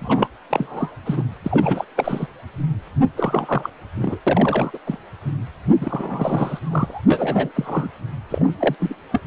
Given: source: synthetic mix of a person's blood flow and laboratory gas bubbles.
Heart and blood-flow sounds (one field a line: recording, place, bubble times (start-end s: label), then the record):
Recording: Doppler ultrasound of blood flow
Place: precordium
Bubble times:
0.00-0.28 s: bubbles
0.50-0.91 s: bubbles
1.05-1.23 s: bubbles
1.44-1.84 s: bubbles
1.96-2.27 s: bubbles
3.17-3.70 s: bubbles
3.97-4.19 s: bubbles
4.27-4.79 s: bubbles
4.87-4.98 s: bubbles
5.81-7.05 s: bubbles
7.10-7.52 s: bubbles
7.54-7.89 s: bubbles
8.29-8.50 s: bubbles
8.59-8.75 s: bubbles
8.79-8.95 s: bubbles
9.12-9.21 s: bubbles
9.24-9.27 s: bubbles
From the record:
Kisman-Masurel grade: 332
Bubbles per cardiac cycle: rolling drumbeat, 9 or more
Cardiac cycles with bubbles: 50 to 99%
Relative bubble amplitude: moderate (0.250 to 0.450)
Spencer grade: 3 (all of the cardiac periods contain showers or single bubble signals, but not dominating or overriding the cardiac motion signals)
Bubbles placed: anywhere in the cardiac cycle